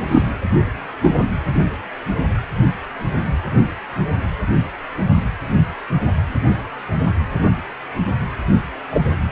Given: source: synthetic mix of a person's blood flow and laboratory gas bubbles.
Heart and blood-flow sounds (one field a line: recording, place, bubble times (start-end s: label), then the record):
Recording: Doppler ultrasound of blood flow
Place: precordium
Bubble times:
0.08-0.23 s: bubbles
1.03-1.14 s: bubbles
8.90-9.01 s: bubbles
From the record:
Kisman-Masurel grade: 123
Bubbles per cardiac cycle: 1 to 2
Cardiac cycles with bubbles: 10 to 50%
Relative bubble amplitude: loud (0.450 to 0.775)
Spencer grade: 2 (many but less than half of the cardiac periods contain bubble signals, singularly or in groups)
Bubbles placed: only in the low amplitude regions of the cardiac cycle